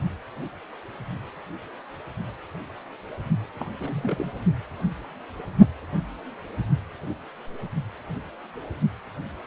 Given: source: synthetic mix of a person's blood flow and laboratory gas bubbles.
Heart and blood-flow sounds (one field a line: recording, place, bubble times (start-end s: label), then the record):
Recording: Doppler ultrasound of blood flow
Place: precordium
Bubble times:
3.59-3.66 s: bubbles
3.79-4.31 s: bubbles
From the record:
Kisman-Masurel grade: 211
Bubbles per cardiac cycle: several, 3 to 8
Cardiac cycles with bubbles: 1 to 10%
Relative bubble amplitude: barely perceptible (0.100 to 0.250)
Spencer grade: 1 (occasional bubble signal discernible with the cardiac motion signal, with majority of cardiac periods free of bubbles)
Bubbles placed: only in the low amplitude regions of the cardiac cycle